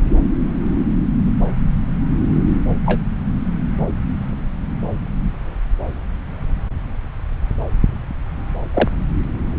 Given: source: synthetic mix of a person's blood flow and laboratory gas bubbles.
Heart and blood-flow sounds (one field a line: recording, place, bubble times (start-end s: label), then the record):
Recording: Doppler ultrasound of blood flow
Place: subclavian vein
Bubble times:
2.85-3.00 s: bubbles
8.73-8.88 s: bubbles
From the record:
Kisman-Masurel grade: 122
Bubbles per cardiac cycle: 1 to 2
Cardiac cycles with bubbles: 10 to 50%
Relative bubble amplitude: moderate (0.250 to 0.450)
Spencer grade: 2 (many but less than half of the cardiac periods contain bubble signals, singularly or in groups)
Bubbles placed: anywhere in the cardiac cycle